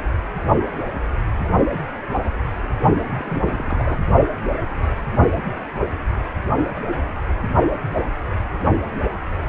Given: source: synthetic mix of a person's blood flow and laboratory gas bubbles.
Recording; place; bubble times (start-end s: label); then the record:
Doppler ultrasound of blood flow; precordium
3.06-4.00 s: bubbles
From the record:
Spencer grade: 1 (occasional bubble signal discernible with the cardiac motion signal, with majority of cardiac periods free of bubbles); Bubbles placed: only in the low amplitude regions of the cardiac cycle